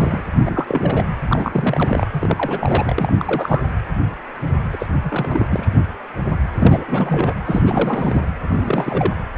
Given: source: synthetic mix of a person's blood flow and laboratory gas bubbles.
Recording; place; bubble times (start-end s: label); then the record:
Doppler ultrasound of blood flow; precordium
0.00-0.20 s: bubbles
0.45-1.06 s: bubbles
1.27-2.07 s: bubbles
2.13-3.13 s: bubbles
3.19-3.62 s: bubbles
4.72-4.86 s: bubbles
5.04-5.46 s: bubbles
5.50-5.68 s: bubbles
6.56-6.84 s: bubbles
6.88-7.35 s: bubbles
7.44-8.28 s: bubbles
8.56-9.13 s: bubbles
From the record:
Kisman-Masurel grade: 332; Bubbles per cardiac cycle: rolling drumbeat, 9 or more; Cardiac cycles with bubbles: 50 to 99%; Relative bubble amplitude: moderate (0.250 to 0.450); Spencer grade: 3 (all of the cardiac periods contain showers or single bubble signals, but not dominating or overriding the cardiac motion signals); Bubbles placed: anywhere in the cardiac cycle